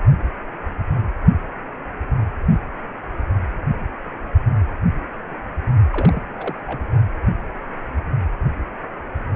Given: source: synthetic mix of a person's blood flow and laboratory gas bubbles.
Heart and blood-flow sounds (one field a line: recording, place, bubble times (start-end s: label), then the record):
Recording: Doppler ultrasound of blood flow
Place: precordium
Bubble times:
5.92-6.22 s: bubbles
6.39-6.60 s: bubbles
6.67-6.80 s: bubbles
From the record:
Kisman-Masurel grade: 221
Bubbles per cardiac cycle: several, 3 to 8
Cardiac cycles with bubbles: 10 to 50%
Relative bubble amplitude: barely perceptible (0.100 to 0.250)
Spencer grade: 2 (many but less than half of the cardiac periods contain bubble signals, singularly or in groups)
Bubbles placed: only in the low amplitude regions of the cardiac cycle